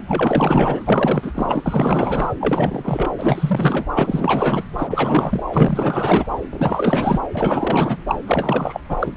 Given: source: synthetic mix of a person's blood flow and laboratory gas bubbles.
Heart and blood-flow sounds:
Doppler ultrasound of blood flow; subclavian vein
0.06-1.32 s: bubbles
1.34-2.33 s: bubbles
2.40-3.10 s: bubbles
3.17-3.87 s: bubbles
3.94-4.64 s: bubbles
4.77-5.42 s: bubbles
5.51-6.26 s: bubbles
6.50-7.20 s: bubbles
7.34-7.97 s: bubbles
8.07-8.15 s: bubbles
8.27-8.81 s: bubbles
8.89-8.96 s: bubbles
8.99-9.12 s: bubbles
From the record:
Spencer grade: 4 (maximum detectable bubble signal sounding continuously throughout systole and diastole of every cardiac period, and overriding the amplitude of the normal cardiac signals); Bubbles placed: anywhere in the cardiac cycle

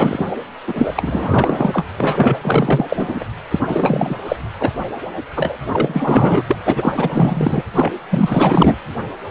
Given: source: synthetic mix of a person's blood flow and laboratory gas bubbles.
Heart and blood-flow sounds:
Doppler ultrasound of blood flow; precordium
0.00-0.24 s: bubbles
0.67-1.86 s: bubbles
1.97-2.36 s: bubbles
2.42-2.85 s: bubbles
2.88-3.25 s: bubbles
3.50-3.60 s: bubbles
3.65-4.17 s: bubbles
4.25-4.36 s: bubbles
4.59-4.71 s: bubbles
5.35-5.58 s: bubbles
5.72-6.58 s: bubbles
6.65-7.63 s: bubbles
7.76-7.94 s: bubbles
8.10-8.75 s: bubbles
9.29-9.31 s: bubbles
From the record:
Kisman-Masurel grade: 444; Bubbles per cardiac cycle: continuous sound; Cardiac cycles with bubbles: 100%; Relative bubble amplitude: maximal (0.775 to 0.999); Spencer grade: 4 (maximum detectable bubble signal sounding continuously throughout systole and diastole of every cardiac period, and overriding the amplitude of the normal cardiac signals); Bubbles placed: anywhere in the cardiac cycle

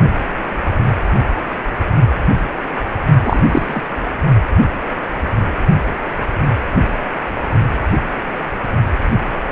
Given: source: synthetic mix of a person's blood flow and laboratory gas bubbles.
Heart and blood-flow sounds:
Doppler ultrasound of blood flow; precordium
3.23-3.81 s: bubbles
From the record:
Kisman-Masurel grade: 213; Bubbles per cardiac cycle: several, 3 to 8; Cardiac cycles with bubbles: 1 to 10%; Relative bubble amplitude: loud (0.450 to 0.775); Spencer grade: 1 (occasional bubble signal discernible with the cardiac motion signal, with majority of cardiac periods free of bubbles); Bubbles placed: only in the low amplitude regions of the cardiac cycle

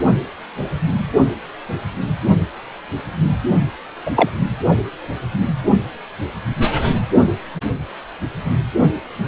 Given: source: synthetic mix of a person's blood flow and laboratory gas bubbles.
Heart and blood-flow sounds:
Doppler ultrasound of blood flow; precordium
4.05-4.11 s: bubbles
4.14-4.29 s: bubbles
From the record:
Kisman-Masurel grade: 113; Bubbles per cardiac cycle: 1 to 2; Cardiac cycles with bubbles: 1 to 10%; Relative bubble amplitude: loud (0.450 to 0.775); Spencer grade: 1 (occasional bubble signal discernible with the cardiac motion signal, with majority of cardiac periods free of bubbles); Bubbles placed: anywhere in the cardiac cycle

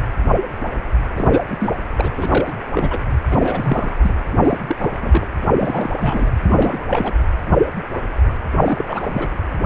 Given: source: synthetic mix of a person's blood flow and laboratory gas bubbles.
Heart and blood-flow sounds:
Doppler ultrasound of blood flow; precordium
1.16-1.42 s: bubbles
1.48-1.70 s: bubbles
1.96-2.11 s: bubbles
2.17-2.54 s: bubbles
2.75-2.97 s: bubbles
3.29-3.96 s: bubbles
4.01-4.14 s: bubbles
4.44-4.57 s: bubbles
4.67-4.76 s: bubbles
4.79-4.97 s: bubbles
5.01-5.26 s: bubbles
5.53-6.31 s: bubbles
6.41-7.15 s: bubbles
8.53-9.28 s: bubbles
From the record:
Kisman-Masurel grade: 332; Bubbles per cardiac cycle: rolling drumbeat, 9 or more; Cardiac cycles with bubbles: 50 to 99%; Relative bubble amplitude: moderate (0.250 to 0.450); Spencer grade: 3 (all of the cardiac periods contain showers or single bubble signals, but not dominating or overriding the cardiac motion signals); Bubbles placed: anywhere in the cardiac cycle

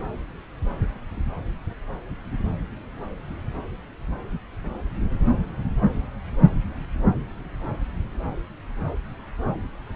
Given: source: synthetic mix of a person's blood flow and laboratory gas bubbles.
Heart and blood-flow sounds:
Doppler ultrasound of blood flow; subclavian vein
no bubbles
From the record:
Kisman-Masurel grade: 000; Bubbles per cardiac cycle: 0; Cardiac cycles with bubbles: 0%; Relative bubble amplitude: no bubbles discernible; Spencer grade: 0 (complete lack of bubble signals)

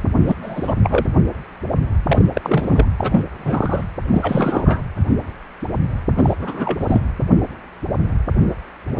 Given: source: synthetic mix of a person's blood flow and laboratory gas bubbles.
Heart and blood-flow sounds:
Doppler ultrasound of blood flow; precordium
0.27-0.36 s: bubbles
0.42-0.75 s: bubbles
0.82-1.05 s: bubbles
2.07-2.30 s: bubbles
2.33-2.85 s: bubbles
2.98-3.23 s: bubbles
3.26-3.85 s: bubbles
4.10-4.82 s: bubbles
6.17-6.34 s: bubbles
6.38-6.78 s: bubbles
6.80-7.00 s: bubbles
From the record:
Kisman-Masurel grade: 333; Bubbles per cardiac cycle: rolling drumbeat, 9 or more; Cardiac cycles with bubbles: 50 to 99%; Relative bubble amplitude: loud (0.450 to 0.775); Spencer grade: 3 (all of the cardiac periods contain showers or single bubble signals, but not dominating or overriding the cardiac motion signals); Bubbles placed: anywhere in the cardiac cycle

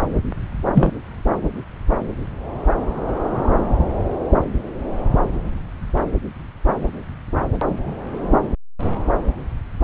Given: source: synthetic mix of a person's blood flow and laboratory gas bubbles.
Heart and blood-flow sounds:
Doppler ultrasound of blood flow; subclavian vein
0.74-0.92 s: bubbles
From the record:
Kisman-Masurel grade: 123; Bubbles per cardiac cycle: 1 to 2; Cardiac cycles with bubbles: 10 to 50%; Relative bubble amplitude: loud (0.450 to 0.775); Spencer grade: 2 (many but less than half of the cardiac periods contain bubble signals, singularly or in groups); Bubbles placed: anywhere in the cardiac cycle

